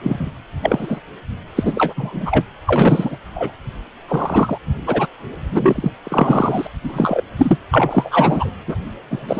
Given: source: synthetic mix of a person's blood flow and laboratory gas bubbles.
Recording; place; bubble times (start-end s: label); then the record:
Doppler ultrasound of blood flow; precordium
0.03-0.32 s: bubbles
0.62-1.00 s: bubbles
1.56-2.46 s: bubbles
2.67-3.17 s: bubbles
3.35-3.52 s: bubbles
4.08-4.58 s: bubbles
4.86-5.06 s: bubbles
5.51-5.91 s: bubbles
6.03-6.67 s: bubbles
6.83-7.23 s: bubbles
7.37-7.58 s: bubbles
7.71-8.51 s: bubbles
8.67-8.77 s: bubbles
9.10-9.39 s: bubbles
From the record:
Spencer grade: 3 (all of the cardiac periods contain showers or single bubble signals, but not dominating or overriding the cardiac motion signals); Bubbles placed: anywhere in the cardiac cycle